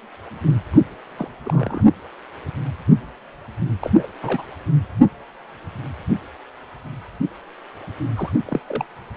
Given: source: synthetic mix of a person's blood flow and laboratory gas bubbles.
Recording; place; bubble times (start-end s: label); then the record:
Doppler ultrasound of blood flow; precordium
0.71-0.81 s: bubbles
1.17-1.28 s: bubbles
1.43-1.83 s: bubbles
3.79-3.91 s: bubbles
3.97-4.07 s: bubbles
4.21-4.45 s: bubbles
8.16-8.32 s: bubbles
8.45-8.60 s: bubbles
8.67-8.85 s: bubbles
From the record:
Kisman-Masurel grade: 221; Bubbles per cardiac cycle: several, 3 to 8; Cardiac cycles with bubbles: 10 to 50%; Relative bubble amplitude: barely perceptible (0.100 to 0.250); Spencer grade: 2 (many but less than half of the cardiac periods contain bubble signals, singularly or in groups); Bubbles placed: anywhere in the cardiac cycle